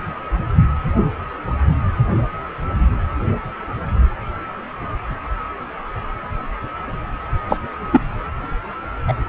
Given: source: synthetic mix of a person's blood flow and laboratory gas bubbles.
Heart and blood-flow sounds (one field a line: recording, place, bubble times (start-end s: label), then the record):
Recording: Doppler ultrasound of blood flow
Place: precordium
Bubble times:
7.49-7.59 s: bubbles
7.92-8.00 s: bubbles
9.07-9.13 s: bubbles
From the record:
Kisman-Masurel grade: 123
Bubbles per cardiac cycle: 1 to 2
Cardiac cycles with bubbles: 10 to 50%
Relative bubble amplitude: loud (0.450 to 0.775)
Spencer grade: 2 (many but less than half of the cardiac periods contain bubble signals, singularly or in groups)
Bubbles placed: anywhere in the cardiac cycle